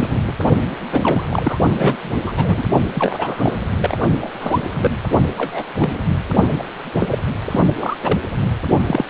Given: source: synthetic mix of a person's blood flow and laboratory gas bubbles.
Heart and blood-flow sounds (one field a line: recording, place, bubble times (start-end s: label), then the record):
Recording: Doppler ultrasound of blood flow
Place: precordium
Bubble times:
0.00-0.19 s: bubbles
0.27-0.33 s: bubbles
0.91-1.24 s: bubbles
1.29-1.58 s: bubbles
1.72-2.23 s: bubbles
2.26-2.33 s: bubbles
2.36-2.64 s: bubbles
2.94-3.56 s: bubbles
3.78-3.96 s: bubbles
4.21-4.29 s: bubbles
4.39-4.60 s: bubbles
4.69-4.98 s: bubbles
5.38-5.64 s: bubbles
5.79-5.98 s: bubbles
6.58-6.66 s: bubbles
6.93-7.19 s: bubbles
7.49-7.62 s: bubbles
7.78-7.97 s: bubbles
8.02-8.21 s: bubbles
8.86-9.05 s: bubbles
From the record:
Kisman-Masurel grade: 242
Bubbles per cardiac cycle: several, 3 to 8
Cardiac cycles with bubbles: 100%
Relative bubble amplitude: moderate (0.250 to 0.450)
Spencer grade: 3 (all of the cardiac periods contain showers or single bubble signals, but not dominating or overriding the cardiac motion signals)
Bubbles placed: only in the low amplitude regions of the cardiac cycle